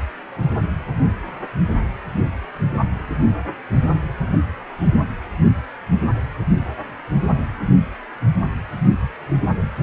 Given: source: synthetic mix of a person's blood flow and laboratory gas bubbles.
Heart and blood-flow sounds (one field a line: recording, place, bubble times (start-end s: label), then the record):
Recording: Doppler ultrasound of blood flow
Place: precordium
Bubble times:
9.01-9.08 s: bubbles
From the record:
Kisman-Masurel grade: 111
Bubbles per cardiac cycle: 1 to 2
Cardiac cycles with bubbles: 1 to 10%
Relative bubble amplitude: barely perceptible (0.100 to 0.250)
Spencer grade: 1 (occasional bubble signal discernible with the cardiac motion signal, with majority of cardiac periods free of bubbles)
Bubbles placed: only in the low amplitude regions of the cardiac cycle